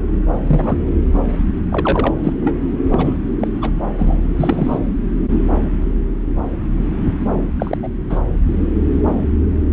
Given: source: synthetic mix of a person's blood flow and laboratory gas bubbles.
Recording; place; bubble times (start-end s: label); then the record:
Doppler ultrasound of blood flow; subclavian vein
0.47-0.78 s: bubbles
1.69-2.14 s: bubbles
2.24-2.33 s: bubbles
2.45-2.56 s: bubbles
2.92-3.17 s: bubbles
3.40-3.48 s: bubbles
3.62-3.71 s: bubbles
3.98-4.17 s: bubbles
4.37-4.79 s: bubbles
7.60-7.78 s: bubbles
7.83-7.88 s: bubbles
8.10-8.20 s: bubbles
From the record:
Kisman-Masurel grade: 232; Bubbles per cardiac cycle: several, 3 to 8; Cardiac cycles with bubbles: 50 to 99%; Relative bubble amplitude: moderate (0.250 to 0.450); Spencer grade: 3 (all of the cardiac periods contain showers or single bubble signals, but not dominating or overriding the cardiac motion signals); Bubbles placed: anywhere in the cardiac cycle